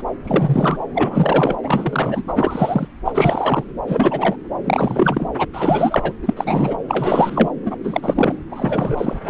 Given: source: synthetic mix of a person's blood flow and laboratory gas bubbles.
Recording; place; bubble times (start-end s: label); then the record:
Doppler ultrasound of blood flow; subclavian vein
0.00-0.04 s: bubbles
0.24-0.84 s: bubbles
0.94-1.56 s: bubbles
1.63-2.23 s: bubbles
2.28-2.87 s: bubbles
3.05-3.64 s: bubbles
3.87-4.36 s: bubbles
4.64-5.29 s: bubbles
5.38-5.45 s: bubbles
5.53-6.13 s: bubbles
6.22-6.33 s: bubbles
6.36-6.76 s: bubbles
6.88-7.51 s: bubbles
7.65-7.76 s: bubbles
7.83-8.35 s: bubbles
8.51-9.19 s: bubbles
9.24-9.30 s: bubbles
From the record:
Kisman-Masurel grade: 343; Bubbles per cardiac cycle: rolling drumbeat, 9 or more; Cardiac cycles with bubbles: 100%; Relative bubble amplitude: loud (0.450 to 0.775); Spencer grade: 3 (all of the cardiac periods contain showers or single bubble signals, but not dominating or overriding the cardiac motion signals); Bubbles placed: anywhere in the cardiac cycle